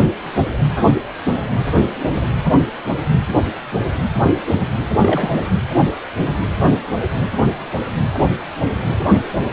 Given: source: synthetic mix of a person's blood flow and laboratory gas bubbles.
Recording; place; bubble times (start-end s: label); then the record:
Doppler ultrasound of blood flow; precordium
4.95-5.34 s: bubbles
5.36-5.45 s: bubbles
From the record:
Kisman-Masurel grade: 212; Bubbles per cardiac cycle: several, 3 to 8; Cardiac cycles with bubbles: 1 to 10%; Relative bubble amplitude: moderate (0.250 to 0.450); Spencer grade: 1 (occasional bubble signal discernible with the cardiac motion signal, with majority of cardiac periods free of bubbles); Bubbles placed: anywhere in the cardiac cycle